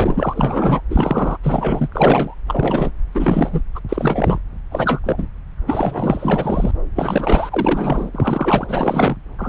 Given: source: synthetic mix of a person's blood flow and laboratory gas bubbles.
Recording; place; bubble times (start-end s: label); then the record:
Doppler ultrasound of blood flow; subclavian vein
0.00-0.81 s: bubbles
0.90-1.38 s: bubbles
1.43-1.88 s: bubbles
1.92-2.34 s: bubbles
2.48-2.92 s: bubbles
3.12-3.62 s: bubbles
3.75-3.80 s: bubbles
3.89-4.38 s: bubbles
4.71-5.01 s: bubbles
5.04-5.27 s: bubbles
5.67-6.72 s: bubbles
6.95-8.10 s: bubbles
8.13-9.16 s: bubbles
9.38-9.48 s: bubbles
From the record:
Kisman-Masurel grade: 343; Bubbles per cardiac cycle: rolling drumbeat, 9 or more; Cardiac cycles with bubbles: 100%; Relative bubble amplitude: loud (0.450 to 0.775); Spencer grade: 3 (all of the cardiac periods contain showers or single bubble signals, but not dominating or overriding the cardiac motion signals); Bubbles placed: anywhere in the cardiac cycle